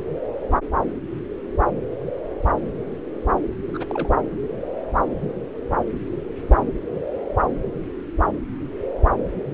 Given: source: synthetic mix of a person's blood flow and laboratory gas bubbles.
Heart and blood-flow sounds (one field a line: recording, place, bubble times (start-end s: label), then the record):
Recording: Doppler ultrasound of blood flow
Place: subclavian vein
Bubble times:
3.67-4.10 s: bubbles
From the record:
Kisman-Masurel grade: 211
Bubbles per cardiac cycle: several, 3 to 8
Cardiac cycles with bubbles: 1 to 10%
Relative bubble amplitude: barely perceptible (0.100 to 0.250)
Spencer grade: 1 (occasional bubble signal discernible with the cardiac motion signal, with majority of cardiac periods free of bubbles)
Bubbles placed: anywhere in the cardiac cycle